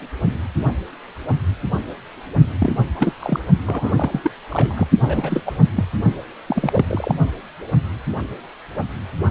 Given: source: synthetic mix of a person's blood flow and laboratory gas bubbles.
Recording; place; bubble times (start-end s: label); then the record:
Doppler ultrasound of blood flow; precordium
2.58-2.73 s: bubbles
2.96-3.13 s: bubbles
3.19-3.40 s: bubbles
3.66-3.93 s: bubbles
3.96-4.30 s: bubbles
4.49-4.89 s: bubbles
5.00-5.56 s: bubbles
5.76-5.84 s: bubbles
6.46-7.15 s: bubbles
From the record:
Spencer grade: 2 (many but less than half of the cardiac periods contain bubble signals, singularly or in groups); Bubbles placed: only in the low amplitude regions of the cardiac cycle